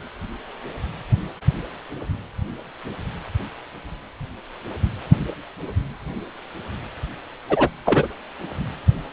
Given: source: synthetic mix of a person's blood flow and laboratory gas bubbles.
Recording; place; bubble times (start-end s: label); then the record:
Doppler ultrasound of blood flow; precordium
7.49-7.69 s: bubbles
7.85-8.08 s: bubbles
From the record:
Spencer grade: 1 (occasional bubble signal discernible with the cardiac motion signal, with majority of cardiac periods free of bubbles); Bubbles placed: anywhere in the cardiac cycle